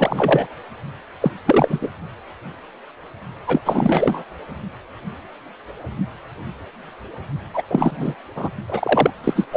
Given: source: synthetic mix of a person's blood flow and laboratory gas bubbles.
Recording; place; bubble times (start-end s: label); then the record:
Doppler ultrasound of blood flow; precordium
0.00-0.47 s: bubbles
1.21-1.31 s: bubbles
1.46-1.89 s: bubbles
3.46-3.60 s: bubbles
3.65-4.23 s: bubbles
7.53-7.62 s: bubbles
7.69-8.14 s: bubbles
8.36-8.49 s: bubbles
8.68-9.11 s: bubbles
9.23-9.47 s: bubbles
9.51-9.57 s: bubbles
From the record:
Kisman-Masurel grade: 333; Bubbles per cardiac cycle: rolling drumbeat, 9 or more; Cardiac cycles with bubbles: 50 to 99%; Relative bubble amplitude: loud (0.450 to 0.775); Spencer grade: 3 (all of the cardiac periods contain showers or single bubble signals, but not dominating or overriding the cardiac motion signals); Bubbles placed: only in the low amplitude regions of the cardiac cycle